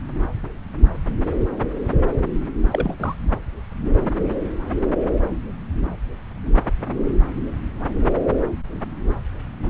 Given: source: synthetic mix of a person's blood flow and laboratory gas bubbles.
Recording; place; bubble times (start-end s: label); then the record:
Doppler ultrasound of blood flow; subclavian vein
2.72-2.96 s: bubbles
3.00-3.15 s: bubbles
From the record:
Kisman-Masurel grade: 212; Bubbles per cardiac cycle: several, 3 to 8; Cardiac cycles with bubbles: 1 to 10%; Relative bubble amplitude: moderate (0.250 to 0.450); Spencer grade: 1 (occasional bubble signal discernible with the cardiac motion signal, with majority of cardiac periods free of bubbles); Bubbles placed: anywhere in the cardiac cycle